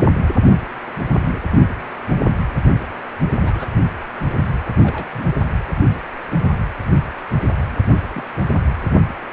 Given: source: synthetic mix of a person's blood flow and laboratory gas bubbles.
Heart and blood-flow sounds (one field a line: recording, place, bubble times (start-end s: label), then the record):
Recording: Doppler ultrasound of blood flow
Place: precordium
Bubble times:
1.14-1.41 s: bubbles
3.38-3.68 s: bubbles
4.78-5.31 s: bubbles
8.15-8.24 s: bubbles
From the record:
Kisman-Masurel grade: 121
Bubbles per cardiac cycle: 1 to 2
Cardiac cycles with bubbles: 10 to 50%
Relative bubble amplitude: barely perceptible (0.100 to 0.250)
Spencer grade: 2 (many but less than half of the cardiac periods contain bubble signals, singularly or in groups)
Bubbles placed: anywhere in the cardiac cycle